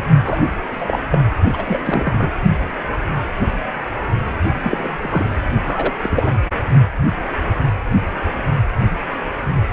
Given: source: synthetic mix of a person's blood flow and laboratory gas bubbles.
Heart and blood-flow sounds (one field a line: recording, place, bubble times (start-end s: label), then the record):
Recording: Doppler ultrasound of blood flow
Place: precordium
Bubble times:
0.24-0.39 s: bubbles
0.71-0.97 s: bubbles
1.10-1.18 s: bubbles
1.52-2.30 s: bubbles
4.63-4.97 s: bubbles
5.01-5.42 s: bubbles
5.63-5.93 s: bubbles
6.02-6.38 s: bubbles
From the record:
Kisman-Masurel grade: 222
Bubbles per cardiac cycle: several, 3 to 8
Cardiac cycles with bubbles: 10 to 50%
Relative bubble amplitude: moderate (0.250 to 0.450)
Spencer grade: 2 (many but less than half of the cardiac periods contain bubble signals, singularly or in groups)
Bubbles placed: only in the low amplitude regions of the cardiac cycle